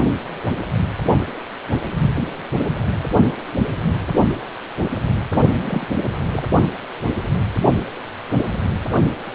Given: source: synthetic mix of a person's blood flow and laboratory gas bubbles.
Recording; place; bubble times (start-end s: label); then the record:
Doppler ultrasound of blood flow; precordium
5.65-5.85 s: bubbles
6.33-6.42 s: bubbles
From the record:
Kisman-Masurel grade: 122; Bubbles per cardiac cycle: 1 to 2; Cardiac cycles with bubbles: 10 to 50%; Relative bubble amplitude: moderate (0.250 to 0.450); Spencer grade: 2 (many but less than half of the cardiac periods contain bubble signals, singularly or in groups); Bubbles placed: only in the low amplitude regions of the cardiac cycle